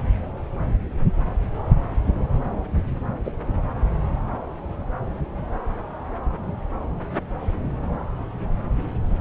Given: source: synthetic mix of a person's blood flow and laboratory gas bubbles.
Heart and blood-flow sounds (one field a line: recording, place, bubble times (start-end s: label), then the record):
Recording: Doppler ultrasound of blood flow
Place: subclavian vein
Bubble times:
3.25-3.32 s: bubbles
From the record:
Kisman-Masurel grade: 113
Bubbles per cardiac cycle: 1 to 2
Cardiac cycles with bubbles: 1 to 10%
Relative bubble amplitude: loud (0.450 to 0.775)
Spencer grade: 1 (occasional bubble signal discernible with the cardiac motion signal, with majority of cardiac periods free of bubbles)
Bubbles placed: anywhere in the cardiac cycle